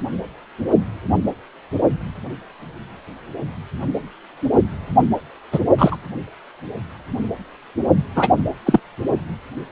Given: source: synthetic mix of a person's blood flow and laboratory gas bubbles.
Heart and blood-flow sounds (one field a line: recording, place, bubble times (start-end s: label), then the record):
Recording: Doppler ultrasound of blood flow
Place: precordium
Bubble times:
5.51-5.59 s: bubbles
5.78-5.96 s: bubbles
8.15-8.28 s: bubbles
8.66-8.80 s: bubbles
From the record:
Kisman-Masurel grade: 223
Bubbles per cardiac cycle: several, 3 to 8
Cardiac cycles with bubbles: 10 to 50%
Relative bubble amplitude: loud (0.450 to 0.775)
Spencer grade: 2 (many but less than half of the cardiac periods contain bubble signals, singularly or in groups)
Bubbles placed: only in the low amplitude regions of the cardiac cycle